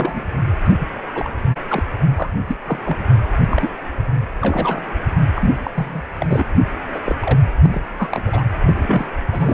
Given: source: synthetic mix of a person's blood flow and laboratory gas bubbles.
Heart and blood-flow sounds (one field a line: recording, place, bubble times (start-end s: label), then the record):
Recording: Doppler ultrasound of blood flow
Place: precordium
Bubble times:
0.00-0.24 s: bubbles
0.65-0.68 s: bubbles
0.79-0.86 s: bubbles
1.14-1.30 s: bubbles
1.69-1.83 s: bubbles
2.15-2.30 s: bubbles
2.47-2.56 s: bubbles
2.67-2.79 s: bubbles
2.85-2.97 s: bubbles
3.51-3.70 s: bubbles
4.41-4.81 s: bubbles
5.36-5.51 s: bubbles
5.64-5.71 s: bubbles
5.74-6.04 s: bubbles
6.20-6.44 s: bubbles
6.93-6.99 s: bubbles
7.04-7.15 s: bubbles
7.21-7.39 s: bubbles
7.63-7.80 s: bubbles
7.98-8.45 s: bubbles
8.67-9.08 s: bubbles
9.32-9.54 s: bubbles
From the record:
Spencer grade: 3 (all of the cardiac periods contain showers or single bubble signals, but not dominating or overriding the cardiac motion signals)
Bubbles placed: anywhere in the cardiac cycle